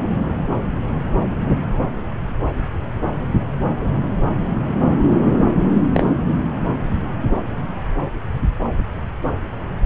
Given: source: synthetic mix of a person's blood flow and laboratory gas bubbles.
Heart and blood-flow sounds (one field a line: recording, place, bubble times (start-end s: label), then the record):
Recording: Doppler ultrasound of blood flow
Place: subclavian vein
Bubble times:
5.94-6.13 s: bubbles
From the record:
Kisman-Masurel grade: 113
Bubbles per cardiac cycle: 1 to 2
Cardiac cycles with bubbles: 1 to 10%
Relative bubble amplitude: loud (0.450 to 0.775)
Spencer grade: 1 (occasional bubble signal discernible with the cardiac motion signal, with majority of cardiac periods free of bubbles)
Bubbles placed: anywhere in the cardiac cycle